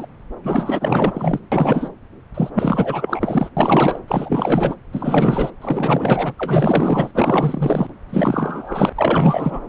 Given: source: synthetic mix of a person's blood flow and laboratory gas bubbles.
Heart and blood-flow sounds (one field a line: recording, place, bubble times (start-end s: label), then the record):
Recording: Doppler ultrasound of blood flow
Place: subclavian vein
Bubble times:
0.00-0.06 s: bubbles
0.44-1.40 s: bubbles
1.52-1.89 s: bubbles
2.34-2.50 s: bubbles
2.54-3.50 s: bubbles
3.56-3.99 s: bubbles
4.07-4.75 s: bubbles
4.92-5.50 s: bubbles
5.61-6.34 s: bubbles
6.38-7.11 s: bubbles
7.14-7.87 s: bubbles
8.09-8.89 s: bubbles
8.96-9.61 s: bubbles
From the record:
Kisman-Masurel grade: 444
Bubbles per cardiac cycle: continuous sound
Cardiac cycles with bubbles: 100%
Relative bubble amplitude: maximal (0.775 to 0.999)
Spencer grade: 4 (maximum detectable bubble signal sounding continuously throughout systole and diastole of every cardiac period, and overriding the amplitude of the normal cardiac signals)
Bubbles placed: anywhere in the cardiac cycle